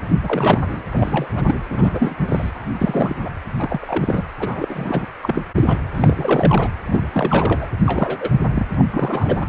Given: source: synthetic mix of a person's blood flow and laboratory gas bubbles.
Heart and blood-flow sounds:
Doppler ultrasound of blood flow; precordium
0.23-0.82 s: bubbles
0.91-1.59 s: bubbles
1.71-2.15 s: bubbles
2.27-2.51 s: bubbles
2.79-3.16 s: bubbles
3.23-3.30 s: bubbles
3.59-4.23 s: bubbles
4.39-5.07 s: bubbles
5.22-5.43 s: bubbles
5.54-5.79 s: bubbles
5.94-6.68 s: bubbles
6.81-7.69 s: bubbles
7.82-8.30 s: bubbles
8.54-8.67 s: bubbles
8.74-8.85 s: bubbles
8.91-9.46 s: bubbles
From the record:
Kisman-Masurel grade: 342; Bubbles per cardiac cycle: rolling drumbeat, 9 or more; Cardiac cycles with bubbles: 100%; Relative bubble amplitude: moderate (0.250 to 0.450); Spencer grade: 3 (all of the cardiac periods contain showers or single bubble signals, but not dominating or overriding the cardiac motion signals); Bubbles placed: anywhere in the cardiac cycle

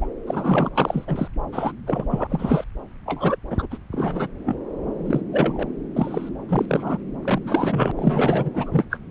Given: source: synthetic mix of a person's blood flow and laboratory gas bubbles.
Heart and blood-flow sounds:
Doppler ultrasound of blood flow; subclavian vein
0.01-0.06 s: bubbles
0.26-0.70 s: bubbles
0.75-1.28 s: bubbles
1.53-1.72 s: bubbles
1.87-2.04 s: bubbles
2.10-2.65 s: bubbles
3.06-3.36 s: bubbles
3.50-3.67 s: bubbles
3.71-3.78 s: bubbles
3.92-4.28 s: bubbles
4.46-4.55 s: bubbles
5.04-5.21 s: bubbles
5.32-5.67 s: bubbles
5.96-6.29 s: bubbles
6.49-6.98 s: bubbles
7.22-7.92 s: bubbles
7.97-8.49 s: bubbles
8.54-8.84 s: bubbles
8.90-8.97 s: bubbles
From the record:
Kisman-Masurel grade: 242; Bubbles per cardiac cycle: several, 3 to 8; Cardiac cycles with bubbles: 100%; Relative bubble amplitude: moderate (0.250 to 0.450); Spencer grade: 3 (all of the cardiac periods contain showers or single bubble signals, but not dominating or overriding the cardiac motion signals); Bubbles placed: anywhere in the cardiac cycle

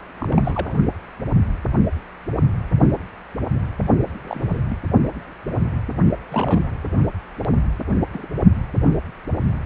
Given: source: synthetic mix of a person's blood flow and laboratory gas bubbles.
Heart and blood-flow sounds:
Doppler ultrasound of blood flow; precordium
0.18-0.74 s: bubbles
4.24-4.62 s: bubbles
4.70-4.78 s: bubbles
6.29-6.70 s: bubbles
7.88-7.93 s: bubbles
8.13-8.26 s: bubbles
From the record:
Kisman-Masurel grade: 221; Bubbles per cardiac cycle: several, 3 to 8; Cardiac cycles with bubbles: 10 to 50%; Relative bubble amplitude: barely perceptible (0.100 to 0.250); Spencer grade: 2 (many but less than half of the cardiac periods contain bubble signals, singularly or in groups); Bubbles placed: only in the low amplitude regions of the cardiac cycle

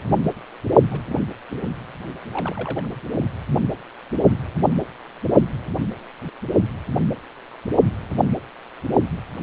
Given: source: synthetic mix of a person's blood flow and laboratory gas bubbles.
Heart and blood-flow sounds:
Doppler ultrasound of blood flow; precordium
0.91-1.33 s: bubbles
1.49-1.69 s: bubbles
2.31-2.89 s: bubbles
3.11-3.24 s: bubbles
From the record:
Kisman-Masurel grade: 221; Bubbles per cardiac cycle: several, 3 to 8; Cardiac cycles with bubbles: 10 to 50%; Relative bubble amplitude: barely perceptible (0.100 to 0.250); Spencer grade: 2 (many but less than half of the cardiac periods contain bubble signals, singularly or in groups); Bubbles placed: only in the low amplitude regions of the cardiac cycle

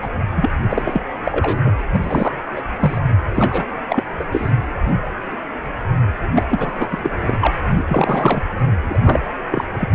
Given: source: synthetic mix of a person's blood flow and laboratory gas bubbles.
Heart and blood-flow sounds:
Doppler ultrasound of blood flow; precordium
0.00-0.08 s: bubbles
0.36-0.50 s: bubbles
0.65-1.01 s: bubbles
1.23-1.59 s: bubbles
1.62-1.72 s: bubbles
1.92-2.00 s: bubbles
2.04-2.33 s: bubbles
2.56-2.61 s: bubbles
2.81-3.00 s: bubbles
3.34-3.66 s: bubbles
3.90-4.04 s: bubbles
4.19-4.24 s: bubbles
4.32-4.51 s: bubbles
6.33-6.43 s: bubbles
6.48-6.88 s: bubbles
6.91-7.10 s: bubbles
7.20-7.38 s: bubbles
7.41-7.47 s: bubbles
7.71-7.85 s: bubbles
7.88-8.42 s: bubbles
8.88-9.26 s: bubbles
9.51-9.66 s: bubbles
9.78-9.95 s: bubbles
From the record:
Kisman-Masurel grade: 332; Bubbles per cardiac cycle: rolling drumbeat, 9 or more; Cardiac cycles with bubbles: 50 to 99%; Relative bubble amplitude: moderate (0.250 to 0.450); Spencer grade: 3 (all of the cardiac periods contain showers or single bubble signals, but not dominating or overriding the cardiac motion signals); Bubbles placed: anywhere in the cardiac cycle

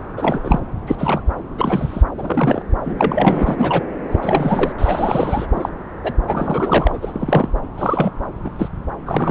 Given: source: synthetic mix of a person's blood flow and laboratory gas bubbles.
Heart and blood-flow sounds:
Doppler ultrasound of blood flow; subclavian vein
0.00-0.02 s: bubbles
0.17-0.60 s: bubbles
0.86-0.95 s: bubbles
0.98-1.20 s: bubbles
1.57-2.02 s: bubbles
2.17-2.62 s: bubbles
2.84-3.83 s: bubbles
4.11-4.72 s: bubbles
4.78-5.46 s: bubbles
5.53-5.69 s: bubbles
6.03-6.13 s: bubbles
6.28-6.98 s: bubbles
7.01-7.51 s: bubbles
7.78-8.11 s: bubbles
8.45-8.51 s: bubbles
8.58-8.69 s: bubbles
9.06-9.31 s: bubbles
From the record:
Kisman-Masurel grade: 242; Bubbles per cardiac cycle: several, 3 to 8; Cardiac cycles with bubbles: 100%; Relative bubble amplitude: moderate (0.250 to 0.450); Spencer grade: 3 (all of the cardiac periods contain showers or single bubble signals, but not dominating or overriding the cardiac motion signals); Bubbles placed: anywhere in the cardiac cycle

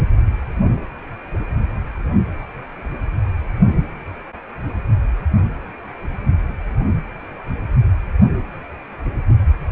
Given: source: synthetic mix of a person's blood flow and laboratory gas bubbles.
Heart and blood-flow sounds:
Doppler ultrasound of blood flow; precordium
no bubbles
From the record:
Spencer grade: 0 (complete lack of bubble signals)

